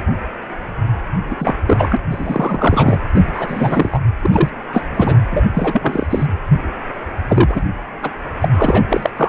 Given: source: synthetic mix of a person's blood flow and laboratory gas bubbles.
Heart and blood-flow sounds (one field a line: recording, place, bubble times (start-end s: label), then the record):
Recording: Doppler ultrasound of blood flow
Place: precordium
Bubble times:
1.30-1.35 s: bubbles
1.39-1.54 s: bubbles
1.67-1.97 s: bubbles
2.10-3.00 s: bubbles
3.13-3.23 s: bubbles
3.33-3.99 s: bubbles
4.22-4.49 s: bubbles
4.72-4.84 s: bubbles
4.95-5.15 s: bubbles
5.31-5.43 s: bubbles
5.54-6.06 s: bubbles
6.09-6.27 s: bubbles
7.27-7.65 s: bubbles
8.03-8.11 s: bubbles
8.40-8.48 s: bubbles
8.51-8.82 s: bubbles
8.89-9.10 s: bubbles
9.16-9.29 s: bubbles
From the record:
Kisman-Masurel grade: 343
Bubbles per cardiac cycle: rolling drumbeat, 9 or more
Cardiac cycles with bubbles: 100%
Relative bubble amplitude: loud (0.450 to 0.775)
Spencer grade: 3 (all of the cardiac periods contain showers or single bubble signals, but not dominating or overriding the cardiac motion signals)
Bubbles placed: anywhere in the cardiac cycle